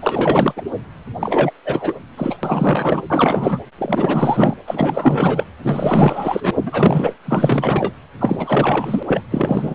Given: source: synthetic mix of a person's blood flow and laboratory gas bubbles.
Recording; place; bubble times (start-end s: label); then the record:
Doppler ultrasound of blood flow; precordium
0.00-0.53 s: bubbles
0.56-0.62 s: bubbles
1.19-1.51 s: bubbles
1.65-1.94 s: bubbles
2.17-2.37 s: bubbles
2.43-3.02 s: bubbles
3.10-3.60 s: bubbles
3.78-4.54 s: bubbles
4.67-5.44 s: bubbles
5.63-6.51 s: bubbles
6.55-6.63 s: bubbles
6.65-7.16 s: bubbles
7.25-7.93 s: bubbles
8.20-9.03 s: bubbles
9.07-9.21 s: bubbles
9.30-9.75 s: bubbles
From the record:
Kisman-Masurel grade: 444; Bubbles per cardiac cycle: continuous sound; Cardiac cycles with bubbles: 100%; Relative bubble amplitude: maximal (0.775 to 0.999); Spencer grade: 4 (maximum detectable bubble signal sounding continuously throughout systole and diastole of every cardiac period, and overriding the amplitude of the normal cardiac signals); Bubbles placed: anywhere in the cardiac cycle